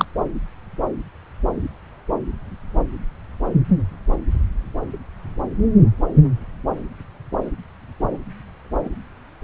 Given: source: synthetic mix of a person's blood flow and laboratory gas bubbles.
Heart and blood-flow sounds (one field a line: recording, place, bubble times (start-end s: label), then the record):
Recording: Doppler ultrasound of blood flow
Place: subclavian vein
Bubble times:
0.00-0.05 s: bubbles
From the record:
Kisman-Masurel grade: 113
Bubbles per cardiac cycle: 1 to 2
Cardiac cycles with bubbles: 1 to 10%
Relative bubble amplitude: loud (0.450 to 0.775)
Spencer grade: 1 (occasional bubble signal discernible with the cardiac motion signal, with majority of cardiac periods free of bubbles)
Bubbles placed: anywhere in the cardiac cycle